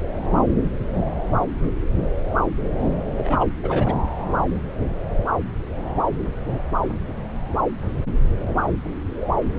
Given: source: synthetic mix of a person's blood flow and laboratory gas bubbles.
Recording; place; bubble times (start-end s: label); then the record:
Doppler ultrasound of blood flow; subclavian vein
3.17-3.46 s: bubbles
3.62-3.94 s: bubbles
From the record:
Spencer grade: 1 (occasional bubble signal discernible with the cardiac motion signal, with majority of cardiac periods free of bubbles); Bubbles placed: anywhere in the cardiac cycle